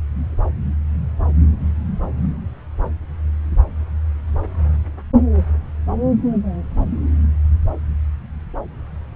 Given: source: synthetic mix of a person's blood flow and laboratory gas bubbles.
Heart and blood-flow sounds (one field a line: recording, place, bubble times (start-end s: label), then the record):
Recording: Doppler ultrasound of blood flow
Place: subclavian vein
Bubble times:
no bubbles
From the record:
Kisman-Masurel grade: 000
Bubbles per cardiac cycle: 0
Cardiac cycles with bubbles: 0%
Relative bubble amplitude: no bubbles discernible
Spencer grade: 0 (complete lack of bubble signals)